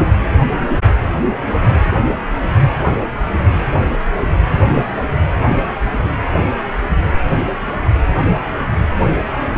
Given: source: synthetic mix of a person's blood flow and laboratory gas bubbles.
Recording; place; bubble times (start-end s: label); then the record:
Doppler ultrasound of blood flow; precordium
9.54-9.58 s: bubbles
From the record:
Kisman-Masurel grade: 111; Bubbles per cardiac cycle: 1 to 2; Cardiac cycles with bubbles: 1 to 10%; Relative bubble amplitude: barely perceptible (0.100 to 0.250); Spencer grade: 1 (occasional bubble signal discernible with the cardiac motion signal, with majority of cardiac periods free of bubbles); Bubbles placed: anywhere in the cardiac cycle